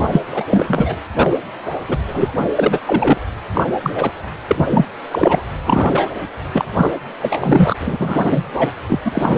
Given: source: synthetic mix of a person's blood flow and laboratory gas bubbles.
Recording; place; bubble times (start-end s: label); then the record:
Doppler ultrasound of blood flow; precordium
0.00-0.08 s: bubbles
0.10-0.22 s: bubbles
0.32-0.43 s: bubbles
0.50-0.96 s: bubbles
1.13-1.33 s: bubbles
1.88-1.98 s: bubbles
2.07-2.33 s: bubbles
2.55-2.80 s: bubbles
2.86-3.17 s: bubbles
3.54-3.63 s: bubbles
3.83-3.92 s: bubbles
3.95-4.12 s: bubbles
4.48-4.85 s: bubbles
5.11-5.42 s: bubbles
5.66-6.10 s: bubbles
6.52-6.65 s: bubbles
6.77-6.91 s: bubbles
7.20-7.75 s: bubbles
7.79-8.44 s: bubbles
8.54-8.71 s: bubbles
8.90-9.00 s: bubbles
9.04-9.38 s: bubbles
From the record:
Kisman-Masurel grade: 343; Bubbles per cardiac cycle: rolling drumbeat, 9 or more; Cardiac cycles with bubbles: 100%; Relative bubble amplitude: loud (0.450 to 0.775); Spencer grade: 3 (all of the cardiac periods contain showers or single bubble signals, but not dominating or overriding the cardiac motion signals); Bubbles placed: anywhere in the cardiac cycle